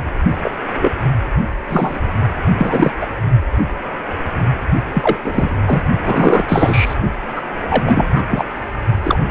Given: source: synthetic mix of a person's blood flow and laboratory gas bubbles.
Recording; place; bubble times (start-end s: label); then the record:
Doppler ultrasound of blood flow; precordium
0.42-0.52 s: bubbles
0.78-0.92 s: bubbles
1.69-2.00 s: bubbles
2.58-2.90 s: bubbles
3.00-3.07 s: bubbles
4.93-5.17 s: bubbles
5.24-5.56 s: bubbles
5.67-5.81 s: bubbles
6.04-6.95 s: bubbles
7.35-7.42 s: bubbles
7.68-7.83 s: bubbles
7.86-8.23 s: bubbles
8.30-8.45 s: bubbles
9.03-9.19 s: bubbles
From the record:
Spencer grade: 3 (all of the cardiac periods contain showers or single bubble signals, but not dominating or overriding the cardiac motion signals); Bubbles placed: only in the low amplitude regions of the cardiac cycle